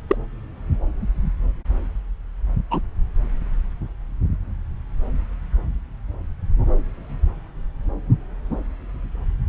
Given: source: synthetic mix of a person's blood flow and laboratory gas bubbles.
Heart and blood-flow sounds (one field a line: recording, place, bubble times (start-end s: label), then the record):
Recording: Doppler ultrasound of blood flow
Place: subclavian vein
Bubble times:
0.09-0.16 s: bubbles
2.70-2.81 s: bubbles
From the record:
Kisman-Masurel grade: 123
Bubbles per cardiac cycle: 1 to 2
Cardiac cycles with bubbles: 10 to 50%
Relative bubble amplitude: loud (0.450 to 0.775)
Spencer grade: 2 (many but less than half of the cardiac periods contain bubble signals, singularly or in groups)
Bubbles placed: anywhere in the cardiac cycle